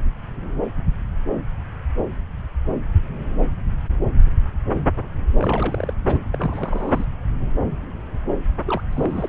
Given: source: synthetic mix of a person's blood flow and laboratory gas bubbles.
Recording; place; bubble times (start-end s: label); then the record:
Doppler ultrasound of blood flow; subclavian vein
5.38-5.94 s: bubbles
6.06-6.18 s: bubbles
6.31-7.05 s: bubbles
8.66-8.81 s: bubbles
8.91-9.29 s: bubbles
From the record:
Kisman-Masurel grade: 222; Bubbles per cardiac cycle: several, 3 to 8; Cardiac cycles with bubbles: 10 to 50%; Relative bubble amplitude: moderate (0.250 to 0.450); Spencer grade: 2 (many but less than half of the cardiac periods contain bubble signals, singularly or in groups); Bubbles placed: anywhere in the cardiac cycle